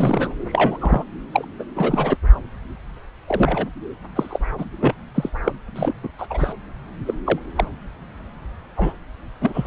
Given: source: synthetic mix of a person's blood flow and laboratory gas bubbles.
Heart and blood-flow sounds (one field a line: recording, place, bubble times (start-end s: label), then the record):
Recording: Doppler ultrasound of blood flow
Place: subclavian vein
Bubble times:
0.00-0.35 s: bubbles
0.46-0.78 s: bubbles
0.80-1.04 s: bubbles
1.32-1.45 s: bubbles
1.59-1.64 s: bubbles
1.75-2.17 s: bubbles
3.27-3.67 s: bubbles
4.15-4.38 s: bubbles
4.57-4.65 s: bubbles
4.80-4.94 s: bubbles
5.14-5.29 s: bubbles
5.43-5.52 s: bubbles
5.75-5.94 s: bubbles
6.03-6.08 s: bubbles
6.18-6.26 s: bubbles
6.30-6.53 s: bubbles
7.05-7.14 s: bubbles
7.25-7.39 s: bubbles
7.55-7.64 s: bubbles
8.76-8.93 s: bubbles
9.41-9.67 s: bubbles
From the record:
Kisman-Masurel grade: 242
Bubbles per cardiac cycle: several, 3 to 8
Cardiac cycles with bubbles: 100%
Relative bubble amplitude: moderate (0.250 to 0.450)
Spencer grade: 3 (all of the cardiac periods contain showers or single bubble signals, but not dominating or overriding the cardiac motion signals)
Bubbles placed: anywhere in the cardiac cycle